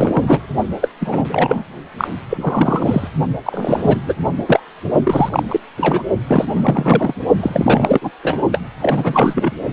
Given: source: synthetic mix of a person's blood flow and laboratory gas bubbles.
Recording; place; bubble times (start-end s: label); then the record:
Doppler ultrasound of blood flow; precordium
0.00-0.40 s: bubbles
0.81-0.89 s: bubbles
1.00-1.28 s: bubbles
1.30-1.64 s: bubbles
1.98-2.08 s: bubbles
2.29-3.08 s: bubbles
3.45-3.97 s: bubbles
4.06-4.15 s: bubbles
4.46-4.60 s: bubbles
5.03-5.60 s: bubbles
5.77-6.02 s: bubbles
6.27-6.45 s: bubbles
6.51-7.14 s: bubbles
7.40-8.11 s: bubbles
8.23-8.41 s: bubbles
8.52-8.60 s: bubbles
8.80-9.52 s: bubbles
From the record:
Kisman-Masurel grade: 343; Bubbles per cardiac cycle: rolling drumbeat, 9 or more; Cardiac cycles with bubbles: 100%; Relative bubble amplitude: loud (0.450 to 0.775); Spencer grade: 3 (all of the cardiac periods contain showers or single bubble signals, but not dominating or overriding the cardiac motion signals); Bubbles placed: only in the low amplitude regions of the cardiac cycle